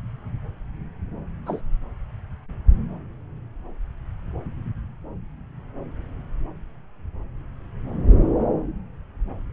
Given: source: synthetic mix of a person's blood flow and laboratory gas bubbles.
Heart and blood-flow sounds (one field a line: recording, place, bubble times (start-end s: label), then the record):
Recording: Doppler ultrasound of blood flow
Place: subclavian vein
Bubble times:
1.46-1.61 s: bubbles
From the record:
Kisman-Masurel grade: 121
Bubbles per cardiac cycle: 1 to 2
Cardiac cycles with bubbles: 10 to 50%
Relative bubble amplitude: barely perceptible (0.100 to 0.250)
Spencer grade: 2 (many but less than half of the cardiac periods contain bubble signals, singularly or in groups)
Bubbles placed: anywhere in the cardiac cycle